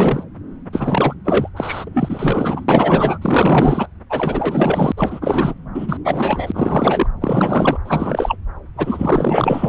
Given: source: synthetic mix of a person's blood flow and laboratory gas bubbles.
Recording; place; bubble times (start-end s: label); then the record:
Doppler ultrasound of blood flow; subclavian vein
0.00-0.24 s: bubbles
0.72-1.14 s: bubbles
1.24-1.49 s: bubbles
1.56-1.89 s: bubbles
1.93-3.18 s: bubbles
3.21-3.88 s: bubbles
4.10-4.92 s: bubbles
4.97-5.54 s: bubbles
5.74-5.98 s: bubbles
6.05-7.07 s: bubbles
7.21-7.78 s: bubbles
7.84-8.36 s: bubbles
8.77-9.69 s: bubbles
From the record:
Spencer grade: 4 (maximum detectable bubble signal sounding continuously throughout systole and diastole of every cardiac period, and overriding the amplitude of the normal cardiac signals); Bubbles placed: anywhere in the cardiac cycle